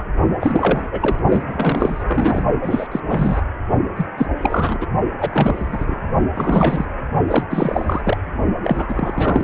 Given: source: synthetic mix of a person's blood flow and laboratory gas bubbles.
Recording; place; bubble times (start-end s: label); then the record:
Doppler ultrasound of blood flow; precordium
0.00-0.04 s: bubbles
0.40-0.88 s: bubbles
0.92-1.20 s: bubbles
1.26-1.44 s: bubbles
1.47-2.04 s: bubbles
2.06-2.43 s: bubbles
2.62-2.87 s: bubbles
2.92-3.00 s: bubbles
3.08-3.42 s: bubbles
3.96-4.06 s: bubbles
4.16-4.26 s: bubbles
4.38-4.87 s: bubbles
5.20-6.00 s: bubbles
6.33-6.85 s: bubbles
7.27-7.44 s: bubbles
7.50-8.18 s: bubbles
8.64-9.44 s: bubbles
From the record:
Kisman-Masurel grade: 342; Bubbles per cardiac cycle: rolling drumbeat, 9 or more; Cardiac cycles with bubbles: 100%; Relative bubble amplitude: moderate (0.250 to 0.450); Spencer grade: 3 (all of the cardiac periods contain showers or single bubble signals, but not dominating or overriding the cardiac motion signals); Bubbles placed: only in the low amplitude regions of the cardiac cycle